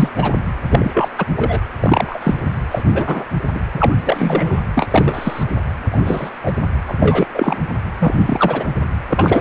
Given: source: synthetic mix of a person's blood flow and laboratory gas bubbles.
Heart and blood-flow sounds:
Doppler ultrasound of blood flow; precordium
0.00-0.09 s: bubbles
0.15-0.34 s: bubbles
0.67-1.08 s: bubbles
1.18-1.25 s: bubbles
1.36-1.59 s: bubbles
1.80-2.35 s: bubbles
2.71-2.83 s: bubbles
2.92-3.24 s: bubbles
3.54-3.60 s: bubbles
3.74-3.94 s: bubbles
4.04-4.61 s: bubbles
4.75-4.87 s: bubbles
4.91-5.44 s: bubbles
5.92-5.98 s: bubbles
6.01-6.29 s: bubbles
6.44-6.52 s: bubbles
6.88-6.94 s: bubbles
7.00-7.27 s: bubbles
7.35-7.58 s: bubbles
8.00-8.67 s: bubbles
9.10-9.41 s: bubbles
From the record:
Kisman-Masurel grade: 243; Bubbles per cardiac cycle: several, 3 to 8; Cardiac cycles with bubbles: 100%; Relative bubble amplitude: loud (0.450 to 0.775); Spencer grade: 3 (all of the cardiac periods contain showers or single bubble signals, but not dominating or overriding the cardiac motion signals); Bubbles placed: anywhere in the cardiac cycle

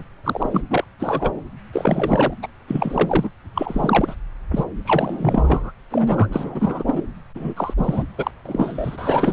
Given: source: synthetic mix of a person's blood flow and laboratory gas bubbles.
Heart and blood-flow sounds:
Doppler ultrasound of blood flow; subclavian vein
0.24-0.61 s: bubbles
0.70-0.84 s: bubbles
0.99-1.31 s: bubbles
1.72-2.33 s: bubbles
2.43-2.48 s: bubbles
2.68-3.29 s: bubbles
3.55-4.15 s: bubbles
4.51-4.64 s: bubbles
4.84-5.71 s: bubbles
5.90-6.84 s: bubbles
6.87-7.02 s: bubbles
7.36-7.54 s: bubbles
7.57-7.74 s: bubbles
7.77-8.04 s: bubbles
8.17-8.31 s: bubbles
8.45-9.33 s: bubbles
From the record:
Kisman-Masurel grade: 342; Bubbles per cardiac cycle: rolling drumbeat, 9 or more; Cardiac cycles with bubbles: 100%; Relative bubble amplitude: moderate (0.250 to 0.450); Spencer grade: 3 (all of the cardiac periods contain showers or single bubble signals, but not dominating or overriding the cardiac motion signals); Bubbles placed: anywhere in the cardiac cycle

